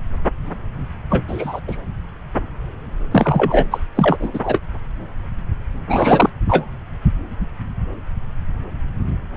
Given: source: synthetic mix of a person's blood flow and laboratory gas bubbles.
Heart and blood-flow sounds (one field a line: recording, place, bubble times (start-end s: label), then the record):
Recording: Doppler ultrasound of blood flow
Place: subclavian vein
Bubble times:
1.09-1.60 s: bubbles
1.67-1.76 s: bubbles
3.11-3.67 s: bubbles
3.71-3.79 s: bubbles
3.95-4.29 s: bubbles
4.33-4.60 s: bubbles
5.88-6.29 s: bubbles
6.48-6.65 s: bubbles
From the record:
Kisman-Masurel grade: 223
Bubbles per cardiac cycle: several, 3 to 8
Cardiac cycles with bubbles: 10 to 50%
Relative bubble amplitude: loud (0.450 to 0.775)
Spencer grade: 2 (many but less than half of the cardiac periods contain bubble signals, singularly or in groups)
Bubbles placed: anywhere in the cardiac cycle